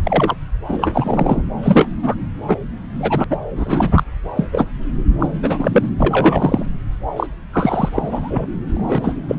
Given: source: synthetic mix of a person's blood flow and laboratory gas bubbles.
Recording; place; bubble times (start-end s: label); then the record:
Doppler ultrasound of blood flow; subclavian vein
0.04-0.34 s: bubbles
0.68-1.42 s: bubbles
1.62-1.88 s: bubbles
2.02-2.15 s: bubbles
2.47-2.58 s: bubbles
3.00-3.25 s: bubbles
3.30-3.38 s: bubbles
3.55-4.04 s: bubbles
4.35-4.45 s: bubbles
4.52-4.71 s: bubbles
5.20-5.29 s: bubbles
5.42-5.90 s: bubbles
5.98-6.66 s: bubbles
7.16-7.27 s: bubbles
7.53-7.89 s: bubbles
7.93-8.46 s: bubbles
8.74-9.13 s: bubbles
9.28-9.36 s: bubbles
From the record:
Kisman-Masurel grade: 243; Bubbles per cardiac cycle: several, 3 to 8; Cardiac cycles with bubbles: 100%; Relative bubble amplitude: loud (0.450 to 0.775); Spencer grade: 3 (all of the cardiac periods contain showers or single bubble signals, but not dominating or overriding the cardiac motion signals); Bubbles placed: anywhere in the cardiac cycle